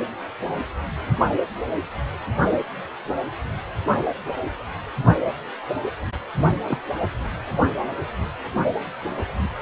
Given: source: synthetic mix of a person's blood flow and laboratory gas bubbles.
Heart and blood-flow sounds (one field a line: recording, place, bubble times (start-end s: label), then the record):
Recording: Doppler ultrasound of blood flow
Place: precordium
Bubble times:
6.68-6.78 s: bubbles
From the record:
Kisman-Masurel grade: 112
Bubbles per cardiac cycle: 1 to 2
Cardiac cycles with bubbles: 1 to 10%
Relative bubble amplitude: moderate (0.250 to 0.450)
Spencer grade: 1 (occasional bubble signal discernible with the cardiac motion signal, with majority of cardiac periods free of bubbles)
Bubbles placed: only in the low amplitude regions of the cardiac cycle